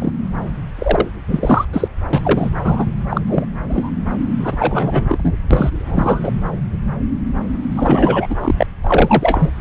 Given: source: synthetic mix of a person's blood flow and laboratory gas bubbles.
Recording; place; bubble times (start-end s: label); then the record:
Doppler ultrasound of blood flow; subclavian vein
0.00-0.11 s: bubbles
0.79-1.07 s: bubbles
1.28-1.65 s: bubbles
1.73-1.88 s: bubbles
2.13-2.50 s: bubbles
2.64-2.85 s: bubbles
3.09-3.21 s: bubbles
3.26-3.45 s: bubbles
3.69-3.90 s: bubbles
4.39-4.55 s: bubbles
4.59-5.05 s: bubbles
5.09-5.33 s: bubbles
5.50-5.71 s: bubbles
5.75-6.31 s: bubbles
7.71-8.27 s: bubbles
8.29-8.35 s: bubbles
8.40-8.66 s: bubbles
8.83-9.51 s: bubbles
From the record:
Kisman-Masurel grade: 233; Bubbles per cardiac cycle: several, 3 to 8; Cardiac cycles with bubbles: 50 to 99%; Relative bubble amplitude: loud (0.450 to 0.775); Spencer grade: 3 (all of the cardiac periods contain showers or single bubble signals, but not dominating or overriding the cardiac motion signals); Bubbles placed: anywhere in the cardiac cycle